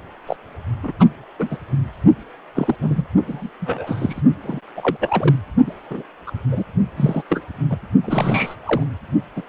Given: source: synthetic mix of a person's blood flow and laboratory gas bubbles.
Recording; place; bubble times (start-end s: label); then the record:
Doppler ultrasound of blood flow; precordium
0.27-0.36 s: bubbles
0.83-0.93 s: bubbles
0.99-1.08 s: bubbles
1.39-1.48 s: bubbles
1.51-1.57 s: bubbles
2.54-2.75 s: bubbles
2.81-3.06 s: bubbles
3.27-3.50 s: bubbles
3.60-4.21 s: bubbles
4.42-4.60 s: bubbles
4.75-4.96 s: bubbles
5.00-5.36 s: bubbles
5.66-5.73 s: bubbles
5.90-6.02 s: bubbles
6.26-6.31 s: bubbles
6.51-6.63 s: bubbles
6.96-7.23 s: bubbles
7.29-7.43 s: bubbles
7.71-7.78 s: bubbles
8.01-8.55 s: bubbles
8.65-8.83 s: bubbles
9.36-9.42 s: bubbles
From the record:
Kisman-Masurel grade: 242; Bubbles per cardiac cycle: several, 3 to 8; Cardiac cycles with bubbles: 100%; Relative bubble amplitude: moderate (0.250 to 0.450); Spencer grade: 3 (all of the cardiac periods contain showers or single bubble signals, but not dominating or overriding the cardiac motion signals); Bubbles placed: only in the low amplitude regions of the cardiac cycle